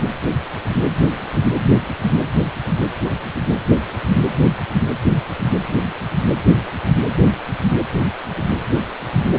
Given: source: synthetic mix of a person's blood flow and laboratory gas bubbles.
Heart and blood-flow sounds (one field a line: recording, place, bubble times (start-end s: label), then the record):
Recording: Doppler ultrasound of blood flow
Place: precordium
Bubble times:
no bubbles
From the record:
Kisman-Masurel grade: 000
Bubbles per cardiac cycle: 0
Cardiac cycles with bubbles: 0%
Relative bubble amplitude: no bubbles discernible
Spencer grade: 0 (complete lack of bubble signals)